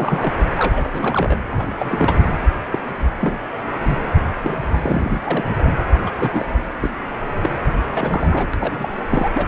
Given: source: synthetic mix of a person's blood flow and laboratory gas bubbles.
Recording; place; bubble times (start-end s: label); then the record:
Doppler ultrasound of blood flow; precordium
0.00-0.34 s: bubbles
0.57-1.35 s: bubbles
1.49-2.17 s: bubbles
2.71-2.79 s: bubbles
3.20-3.38 s: bubbles
3.84-3.98 s: bubbles
4.43-4.56 s: bubbles
4.71-5.44 s: bubbles
6.06-6.11 s: bubbles
6.20-6.45 s: bubbles
6.80-6.90 s: bubbles
7.41-7.49 s: bubbles
7.88-8.47 s: bubbles
8.54-8.56 s: bubbles
8.60-8.89 s: bubbles
9.10-9.28 s: bubbles
9.34-9.48 s: bubbles
From the record:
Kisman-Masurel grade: 242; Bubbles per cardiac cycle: several, 3 to 8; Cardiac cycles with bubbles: 100%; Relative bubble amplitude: moderate (0.250 to 0.450); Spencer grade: 3 (all of the cardiac periods contain showers or single bubble signals, but not dominating or overriding the cardiac motion signals); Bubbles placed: anywhere in the cardiac cycle